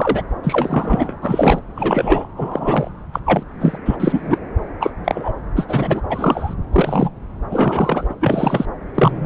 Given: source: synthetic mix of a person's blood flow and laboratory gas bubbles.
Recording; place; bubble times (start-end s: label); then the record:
Doppler ultrasound of blood flow; subclavian vein
0.00-0.22 s: bubbles
0.43-1.18 s: bubbles
1.22-1.59 s: bubbles
1.76-2.28 s: bubbles
2.36-2.90 s: bubbles
3.12-3.20 s: bubbles
3.25-3.43 s: bubbles
3.61-3.78 s: bubbles
3.85-3.96 s: bubbles
4.00-4.38 s: bubbles
4.80-4.94 s: bubbles
5.04-5.32 s: bubbles
5.48-5.50 s: bubbles
5.54-6.02 s: bubbles
6.09-6.54 s: bubbles
6.72-7.10 s: bubbles
7.50-8.14 s: bubbles
8.21-8.65 s: bubbles
8.94-9.26 s: bubbles
From the record:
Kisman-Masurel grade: 233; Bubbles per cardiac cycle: several, 3 to 8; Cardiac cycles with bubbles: 50 to 99%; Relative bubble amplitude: loud (0.450 to 0.775); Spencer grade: 3 (all of the cardiac periods contain showers or single bubble signals, but not dominating or overriding the cardiac motion signals); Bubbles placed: anywhere in the cardiac cycle